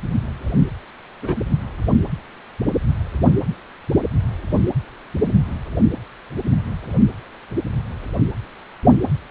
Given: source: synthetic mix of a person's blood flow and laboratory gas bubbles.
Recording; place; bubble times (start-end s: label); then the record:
Doppler ultrasound of blood flow; precordium
1.22-1.42 s: bubbles
From the record:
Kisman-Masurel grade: 111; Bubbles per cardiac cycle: 1 to 2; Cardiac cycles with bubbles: 1 to 10%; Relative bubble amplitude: barely perceptible (0.100 to 0.250); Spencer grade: 1 (occasional bubble signal discernible with the cardiac motion signal, with majority of cardiac periods free of bubbles); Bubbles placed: anywhere in the cardiac cycle